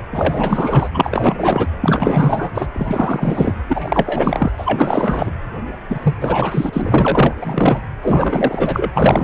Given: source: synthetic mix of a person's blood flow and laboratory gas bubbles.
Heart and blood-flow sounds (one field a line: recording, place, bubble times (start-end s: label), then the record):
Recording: Doppler ultrasound of blood flow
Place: precordium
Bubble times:
0.00-0.02 s: bubbles
0.12-0.90 s: bubbles
0.94-1.68 s: bubbles
1.80-2.51 s: bubbles
2.54-2.66 s: bubbles
2.72-3.54 s: bubbles
3.69-4.52 s: bubbles
4.58-5.32 s: bubbles
5.90-6.15 s: bubbles
6.21-7.33 s: bubbles
7.42-7.81 s: bubbles
8.02-8.92 s: bubbles
8.95-9.24 s: bubbles
From the record:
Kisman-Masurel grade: 444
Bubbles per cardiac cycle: continuous sound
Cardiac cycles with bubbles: 100%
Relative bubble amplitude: maximal (0.775 to 0.999)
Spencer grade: 4 (maximum detectable bubble signal sounding continuously throughout systole and diastole of every cardiac period, and overriding the amplitude of the normal cardiac signals)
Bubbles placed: anywhere in the cardiac cycle